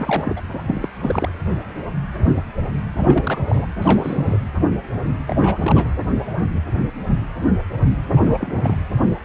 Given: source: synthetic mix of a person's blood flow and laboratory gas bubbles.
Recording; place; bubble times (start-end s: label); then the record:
Doppler ultrasound of blood flow; precordium
0.00-0.40 s: bubbles
0.68-0.89 s: bubbles
0.97-1.30 s: bubbles
2.97-3.40 s: bubbles
3.46-3.66 s: bubbles
3.81-4.38 s: bubbles
5.27-5.36 s: bubbles
5.40-5.58 s: bubbles
5.62-5.92 s: bubbles
8.11-8.21 s: bubbles
8.23-8.77 s: bubbles
From the record:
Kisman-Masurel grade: 222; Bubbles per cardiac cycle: several, 3 to 8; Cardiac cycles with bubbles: 10 to 50%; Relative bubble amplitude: moderate (0.250 to 0.450); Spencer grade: 2 (many but less than half of the cardiac periods contain bubble signals, singularly or in groups); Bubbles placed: anywhere in the cardiac cycle